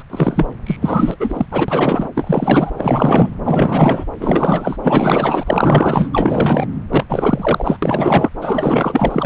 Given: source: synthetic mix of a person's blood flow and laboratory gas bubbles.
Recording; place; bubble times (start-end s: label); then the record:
Doppler ultrasound of blood flow; subclavian vein
0.00-0.03 s: bubbles
0.10-0.47 s: bubbles
0.66-0.77 s: bubbles
0.82-1.16 s: bubbles
1.19-1.46 s: bubbles
1.51-2.09 s: bubbles
2.14-2.71 s: bubbles
2.77-3.30 s: bubbles
3.44-4.05 s: bubbles
4.19-4.77 s: bubbles
4.83-6.11 s: bubbles
6.14-6.67 s: bubbles
6.90-7.04 s: bubbles
7.08-7.79 s: bubbles
7.82-8.29 s: bubbles
8.41-9.26 s: bubbles
From the record:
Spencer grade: 4 (maximum detectable bubble signal sounding continuously throughout systole and diastole of every cardiac period, and overriding the amplitude of the normal cardiac signals); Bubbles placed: anywhere in the cardiac cycle